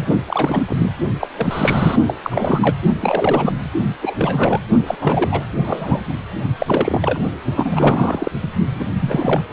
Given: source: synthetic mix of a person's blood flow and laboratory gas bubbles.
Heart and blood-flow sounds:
Doppler ultrasound of blood flow; precordium
0.00-0.05 s: bubbles
0.27-0.65 s: bubbles
0.67-0.90 s: bubbles
1.19-1.29 s: bubbles
1.36-1.96 s: bubbles
2.07-2.13 s: bubbles
2.23-2.75 s: bubbles
3.01-3.52 s: bubbles
4.02-4.16 s: bubbles
4.18-4.60 s: bubbles
4.87-4.96 s: bubbles
5.01-5.44 s: bubbles
5.65-6.01 s: bubbles
6.07-6.14 s: bubbles
6.58-7.20 s: bubbles
7.55-8.31 s: bubbles
8.43-8.48 s: bubbles
8.75-8.85 s: bubbles
9.00-9.42 s: bubbles
From the record:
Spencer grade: 3 (all of the cardiac periods contain showers or single bubble signals, but not dominating or overriding the cardiac motion signals); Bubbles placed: only in the low amplitude regions of the cardiac cycle

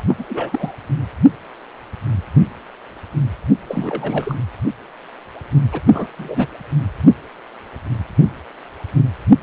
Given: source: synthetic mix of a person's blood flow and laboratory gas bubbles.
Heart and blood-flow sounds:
Doppler ultrasound of blood flow; precordium
0.00-0.04 s: bubbles
0.08-0.15 s: bubbles
0.19-0.24 s: bubbles
0.29-0.72 s: bubbles
3.68-4.36 s: bubbles
5.72-5.80 s: bubbles
5.86-6.07 s: bubbles
6.17-6.48 s: bubbles
From the record:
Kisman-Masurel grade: 222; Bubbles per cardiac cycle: several, 3 to 8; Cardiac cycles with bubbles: 10 to 50%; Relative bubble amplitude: moderate (0.250 to 0.450); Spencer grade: 2 (many but less than half of the cardiac periods contain bubble signals, singularly or in groups); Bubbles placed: anywhere in the cardiac cycle

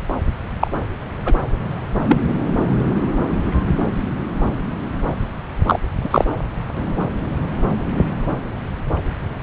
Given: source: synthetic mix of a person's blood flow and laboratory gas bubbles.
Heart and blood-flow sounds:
Doppler ultrasound of blood flow; subclavian vein
0.60-0.67 s: bubbles
1.25-1.33 s: bubbles
2.08-2.17 s: bubbles
5.66-5.79 s: bubbles
6.04-6.25 s: bubbles
From the record:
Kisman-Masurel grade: 123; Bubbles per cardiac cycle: 1 to 2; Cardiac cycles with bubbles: 10 to 50%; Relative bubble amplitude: loud (0.450 to 0.775); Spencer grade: 2 (many but less than half of the cardiac periods contain bubble signals, singularly or in groups); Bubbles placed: anywhere in the cardiac cycle

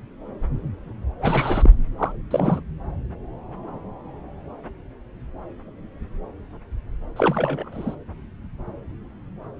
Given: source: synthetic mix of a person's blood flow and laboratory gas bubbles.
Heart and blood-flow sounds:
Doppler ultrasound of blood flow; subclavian vein
1.19-1.70 s: bubbles
1.98-2.12 s: bubbles
2.31-2.60 s: bubbles
7.16-7.68 s: bubbles
7.71-7.95 s: bubbles
From the record:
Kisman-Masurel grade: 222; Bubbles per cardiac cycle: several, 3 to 8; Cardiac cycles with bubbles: 10 to 50%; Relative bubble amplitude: moderate (0.250 to 0.450); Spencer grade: 2 (many but less than half of the cardiac periods contain bubble signals, singularly or in groups); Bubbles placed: anywhere in the cardiac cycle

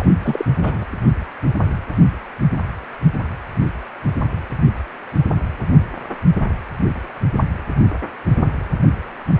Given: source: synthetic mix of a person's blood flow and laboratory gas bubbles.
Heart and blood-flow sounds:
Doppler ultrasound of blood flow; precordium
0.00-0.08 s: bubbles
0.23-0.45 s: bubbles
0.56-0.85 s: bubbles
From the record:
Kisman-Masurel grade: 212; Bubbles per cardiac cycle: several, 3 to 8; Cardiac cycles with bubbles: 1 to 10%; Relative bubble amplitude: moderate (0.250 to 0.450); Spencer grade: 1 (occasional bubble signal discernible with the cardiac motion signal, with majority of cardiac periods free of bubbles); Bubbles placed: anywhere in the cardiac cycle

